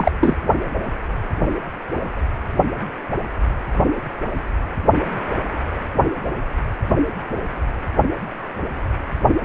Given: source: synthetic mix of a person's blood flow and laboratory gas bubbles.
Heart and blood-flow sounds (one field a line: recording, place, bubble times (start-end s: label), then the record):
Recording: Doppler ultrasound of blood flow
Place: precordium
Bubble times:
0.00-0.12 s: bubbles
0.20-0.36 s: bubbles
From the record:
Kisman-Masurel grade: 213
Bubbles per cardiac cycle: several, 3 to 8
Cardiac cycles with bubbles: 1 to 10%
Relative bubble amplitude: loud (0.450 to 0.775)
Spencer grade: 1 (occasional bubble signal discernible with the cardiac motion signal, with majority of cardiac periods free of bubbles)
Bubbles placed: only in the low amplitude regions of the cardiac cycle